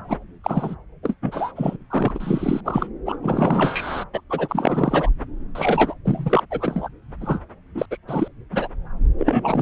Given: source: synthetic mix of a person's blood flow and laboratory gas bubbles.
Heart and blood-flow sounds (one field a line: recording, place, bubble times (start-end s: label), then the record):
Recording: Doppler ultrasound of blood flow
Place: subclavian vein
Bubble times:
0.08-0.17 s: bubbles
0.44-0.76 s: bubbles
1.02-1.15 s: bubbles
1.22-1.52 s: bubbles
1.55-1.76 s: bubbles
1.90-2.12 s: bubbles
2.15-2.61 s: bubbles
2.65-2.89 s: bubbles
3.06-3.17 s: bubbles
3.22-4.04 s: bubbles
4.13-4.21 s: bubbles
4.29-5.10 s: bubbles
5.55-5.94 s: bubbles
6.04-6.44 s: bubbles
6.50-6.88 s: bubbles
7.20-7.39 s: bubbles
7.75-7.86 s: bubbles
7.91-7.97 s: bubbles
8.07-8.28 s: bubbles
8.52-8.68 s: bubbles
9.18-9.62 s: bubbles
From the record:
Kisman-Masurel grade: 343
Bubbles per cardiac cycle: rolling drumbeat, 9 or more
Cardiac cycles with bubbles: 100%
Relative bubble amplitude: loud (0.450 to 0.775)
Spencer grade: 3 (all of the cardiac periods contain showers or single bubble signals, but not dominating or overriding the cardiac motion signals)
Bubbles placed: anywhere in the cardiac cycle